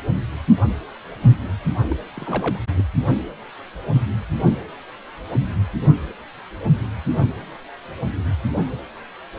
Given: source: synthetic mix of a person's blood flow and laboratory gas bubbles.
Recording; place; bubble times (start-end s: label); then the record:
Doppler ultrasound of blood flow; precordium
1.90-1.96 s: bubbles
2.16-2.59 s: bubbles
2.75-2.85 s: bubbles
From the record:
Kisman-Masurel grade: 221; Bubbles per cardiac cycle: several, 3 to 8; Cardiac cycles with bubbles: 10 to 50%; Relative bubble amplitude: barely perceptible (0.100 to 0.250); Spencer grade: 2 (many but less than half of the cardiac periods contain bubble signals, singularly or in groups); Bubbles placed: only in the low amplitude regions of the cardiac cycle